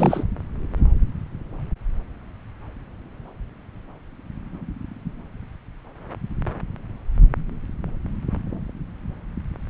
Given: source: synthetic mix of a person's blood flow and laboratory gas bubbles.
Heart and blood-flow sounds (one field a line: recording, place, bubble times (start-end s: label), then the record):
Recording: Doppler ultrasound of blood flow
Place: subclavian vein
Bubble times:
0.00-0.23 s: bubbles
From the record:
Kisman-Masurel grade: 212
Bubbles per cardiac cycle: several, 3 to 8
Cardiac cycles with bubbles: 1 to 10%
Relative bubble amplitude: moderate (0.250 to 0.450)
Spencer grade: 1 (occasional bubble signal discernible with the cardiac motion signal, with majority of cardiac periods free of bubbles)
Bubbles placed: anywhere in the cardiac cycle